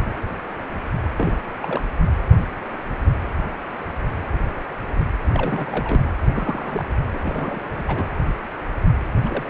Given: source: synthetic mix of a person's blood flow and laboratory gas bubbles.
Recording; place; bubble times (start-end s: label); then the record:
Doppler ultrasound of blood flow; precordium
1.17-1.38 s: bubbles
1.60-1.82 s: bubbles
5.33-6.04 s: bubbles
6.33-6.91 s: bubbles
7.13-7.20 s: bubbles
7.23-7.67 s: bubbles
7.75-7.85 s: bubbles
7.88-8.07 s: bubbles
9.24-9.50 s: bubbles
From the record:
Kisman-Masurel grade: 221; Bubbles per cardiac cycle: several, 3 to 8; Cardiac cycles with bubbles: 10 to 50%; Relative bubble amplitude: barely perceptible (0.100 to 0.250); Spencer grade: 2 (many but less than half of the cardiac periods contain bubble signals, singularly or in groups); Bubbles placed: anywhere in the cardiac cycle